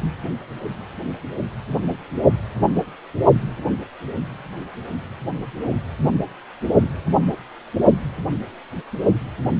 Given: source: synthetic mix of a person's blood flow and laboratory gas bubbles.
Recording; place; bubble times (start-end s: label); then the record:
Doppler ultrasound of blood flow; precordium
no bubbles
From the record:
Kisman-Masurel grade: 000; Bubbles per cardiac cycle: 0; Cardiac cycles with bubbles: 0%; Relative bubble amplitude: no bubbles discernible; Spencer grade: 0 (complete lack of bubble signals)